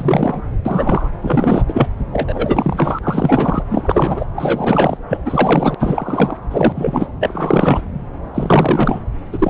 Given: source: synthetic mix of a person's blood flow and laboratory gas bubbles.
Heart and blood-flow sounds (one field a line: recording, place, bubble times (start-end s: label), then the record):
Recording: Doppler ultrasound of blood flow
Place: subclavian vein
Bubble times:
0.00-0.42 s: bubbles
0.65-1.09 s: bubbles
1.23-1.64 s: bubbles
1.68-1.88 s: bubbles
2.12-2.99 s: bubbles
3.03-3.62 s: bubbles
3.69-4.26 s: bubbles
4.36-4.97 s: bubbles
5.09-5.18 s: bubbles
5.25-5.75 s: bubbles
5.80-6.37 s: bubbles
6.51-6.73 s: bubbles
6.75-7.07 s: bubbles
7.20-7.82 s: bubbles
8.34-9.01 s: bubbles
9.33-9.50 s: bubbles
From the record:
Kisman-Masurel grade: 343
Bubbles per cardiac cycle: rolling drumbeat, 9 or more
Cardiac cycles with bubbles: 100%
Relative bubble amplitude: loud (0.450 to 0.775)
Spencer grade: 3 (all of the cardiac periods contain showers or single bubble signals, but not dominating or overriding the cardiac motion signals)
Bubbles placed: anywhere in the cardiac cycle